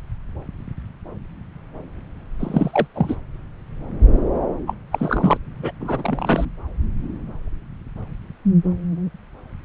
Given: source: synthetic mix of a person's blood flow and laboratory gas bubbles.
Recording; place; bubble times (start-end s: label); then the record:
Doppler ultrasound of blood flow; subclavian vein
2.39-2.86 s: bubbles
2.94-3.16 s: bubbles
4.66-4.74 s: bubbles
4.92-5.38 s: bubbles
5.58-5.71 s: bubbles
5.80-6.45 s: bubbles
From the record:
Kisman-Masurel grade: 223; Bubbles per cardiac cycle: several, 3 to 8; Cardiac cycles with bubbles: 10 to 50%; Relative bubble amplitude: loud (0.450 to 0.775); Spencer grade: 2 (many but less than half of the cardiac periods contain bubble signals, singularly or in groups); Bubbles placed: anywhere in the cardiac cycle